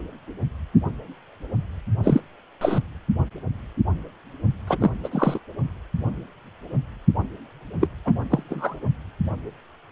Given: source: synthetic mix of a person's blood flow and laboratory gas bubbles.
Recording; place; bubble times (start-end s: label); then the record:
Doppler ultrasound of blood flow; precordium
2.04-2.21 s: bubbles
2.61-2.81 s: bubbles
4.67-4.78 s: bubbles
4.80-4.91 s: bubbles
5.04-5.09 s: bubbles
5.11-5.39 s: bubbles
7.81-7.89 s: bubbles
8.05-8.12 s: bubbles
8.29-8.43 s: bubbles
8.49-8.79 s: bubbles
From the record:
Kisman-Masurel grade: 232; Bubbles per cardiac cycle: several, 3 to 8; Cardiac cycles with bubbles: 50 to 99%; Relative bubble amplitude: moderate (0.250 to 0.450); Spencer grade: 3 (all of the cardiac periods contain showers or single bubble signals, but not dominating or overriding the cardiac motion signals); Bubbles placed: only in the low amplitude regions of the cardiac cycle